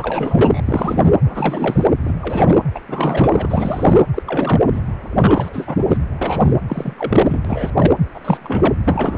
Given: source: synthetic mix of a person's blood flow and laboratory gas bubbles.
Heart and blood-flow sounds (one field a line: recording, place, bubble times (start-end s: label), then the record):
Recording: Doppler ultrasound of blood flow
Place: precordium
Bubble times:
0.00-0.60 s: bubbles
0.65-1.14 s: bubbles
1.24-1.84 s: bubbles
2.05-2.14 s: bubbles
2.21-2.62 s: bubbles
2.75-2.81 s: bubbles
2.88-4.01 s: bubbles
4.14-4.22 s: bubbles
4.26-4.67 s: bubbles
4.71-4.80 s: bubbles
5.15-5.97 s: bubbles
6.21-6.51 s: bubbles
6.68-7.41 s: bubbles
7.44-7.92 s: bubbles
8.14-8.75 s: bubbles
8.84-9.18 s: bubbles
From the record:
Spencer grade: 3 (all of the cardiac periods contain showers or single bubble signals, but not dominating or overriding the cardiac motion signals)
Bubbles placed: anywhere in the cardiac cycle